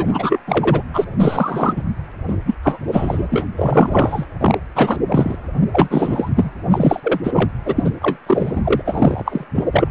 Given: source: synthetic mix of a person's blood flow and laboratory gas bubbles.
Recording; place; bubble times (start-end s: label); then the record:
Doppler ultrasound of blood flow; precordium
0.00-0.06 s: bubbles
0.11-0.39 s: bubbles
0.47-0.83 s: bubbles
0.93-1.04 s: bubbles
1.19-1.82 s: bubbles
2.27-2.36 s: bubbles
2.46-2.55 s: bubbles
2.63-2.80 s: bubbles
2.88-3.27 s: bubbles
3.30-3.44 s: bubbles
3.56-4.26 s: bubbles
4.41-4.58 s: bubbles
4.75-4.96 s: bubbles
5.08-5.35 s: bubbles
5.72-6.29 s: bubbles
6.35-6.50 s: bubbles
6.70-7.00 s: bubbles
7.03-7.21 s: bubbles
7.24-7.50 s: bubbles
7.65-7.91 s: bubbles
8.02-8.17 s: bubbles
8.27-8.61 s: bubbles
8.64-8.81 s: bubbles
8.85-9.45 s: bubbles
9.55-9.64 s: bubbles
9.71-9.88 s: bubbles
From the record:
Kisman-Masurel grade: 343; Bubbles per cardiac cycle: rolling drumbeat, 9 or more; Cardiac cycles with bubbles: 100%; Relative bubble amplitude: loud (0.450 to 0.775); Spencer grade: 3 (all of the cardiac periods contain showers or single bubble signals, but not dominating or overriding the cardiac motion signals); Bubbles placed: anywhere in the cardiac cycle